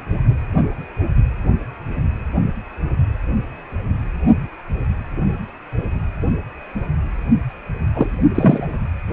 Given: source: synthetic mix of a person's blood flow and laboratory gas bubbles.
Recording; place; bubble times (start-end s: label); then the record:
Doppler ultrasound of blood flow; precordium
7.95-8.10 s: bubbles
8.35-8.68 s: bubbles
From the record:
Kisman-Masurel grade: 123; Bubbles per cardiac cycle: 1 to 2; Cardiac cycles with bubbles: 10 to 50%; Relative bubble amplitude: loud (0.450 to 0.775); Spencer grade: 2 (many but less than half of the cardiac periods contain bubble signals, singularly or in groups); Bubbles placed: only in the low amplitude regions of the cardiac cycle